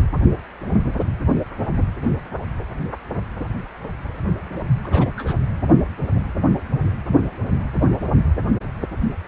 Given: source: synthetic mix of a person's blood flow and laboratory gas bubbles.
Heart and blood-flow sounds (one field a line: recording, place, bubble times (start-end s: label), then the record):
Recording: Doppler ultrasound of blood flow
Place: precordium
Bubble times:
4.84-4.87 s: bubbles
4.91-5.08 s: bubbles
5.16-5.35 s: bubbles
From the record:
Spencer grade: 1 (occasional bubble signal discernible with the cardiac motion signal, with majority of cardiac periods free of bubbles)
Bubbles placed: only in the low amplitude regions of the cardiac cycle